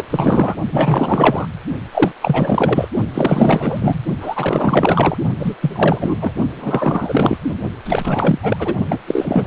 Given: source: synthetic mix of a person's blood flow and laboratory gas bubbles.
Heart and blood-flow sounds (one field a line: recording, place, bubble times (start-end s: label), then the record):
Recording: Doppler ultrasound of blood flow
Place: precordium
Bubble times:
0.00-0.04 s: bubbles
0.10-0.55 s: bubbles
0.72-1.47 s: bubbles
1.92-2.12 s: bubbles
2.22-2.88 s: bubbles
3.14-4.01 s: bubbles
4.20-5.17 s: bubbles
5.39-5.55 s: bubbles
5.61-6.32 s: bubbles
6.56-7.39 s: bubbles
7.85-8.39 s: bubbles
8.42-8.74 s: bubbles
8.89-8.99 s: bubbles
9.06-9.46 s: bubbles
From the record:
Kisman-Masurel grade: 444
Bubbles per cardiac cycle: continuous sound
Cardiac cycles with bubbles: 100%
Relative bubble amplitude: maximal (0.775 to 0.999)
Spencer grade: 4 (maximum detectable bubble signal sounding continuously throughout systole and diastole of every cardiac period, and overriding the amplitude of the normal cardiac signals)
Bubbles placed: only in the low amplitude regions of the cardiac cycle